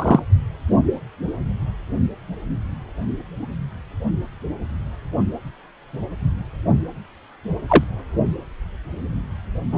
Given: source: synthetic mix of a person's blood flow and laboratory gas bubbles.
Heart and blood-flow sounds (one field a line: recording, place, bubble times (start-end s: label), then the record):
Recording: Doppler ultrasound of blood flow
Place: precordium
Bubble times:
0.00-0.20 s: bubbles
7.67-7.83 s: bubbles
9.72-9.78 s: bubbles
From the record:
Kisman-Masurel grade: 123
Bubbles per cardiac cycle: 1 to 2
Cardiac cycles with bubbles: 10 to 50%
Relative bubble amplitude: loud (0.450 to 0.775)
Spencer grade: 2 (many but less than half of the cardiac periods contain bubble signals, singularly or in groups)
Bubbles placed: anywhere in the cardiac cycle